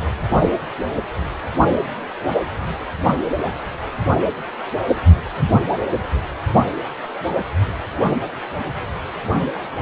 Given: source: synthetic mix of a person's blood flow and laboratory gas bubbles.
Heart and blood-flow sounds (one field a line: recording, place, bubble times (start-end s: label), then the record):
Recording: Doppler ultrasound of blood flow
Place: precordium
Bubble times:
no bubbles
From the record:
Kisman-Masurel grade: 000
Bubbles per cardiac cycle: 0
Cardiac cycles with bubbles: 0%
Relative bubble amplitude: no bubbles discernible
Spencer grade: 0 (complete lack of bubble signals)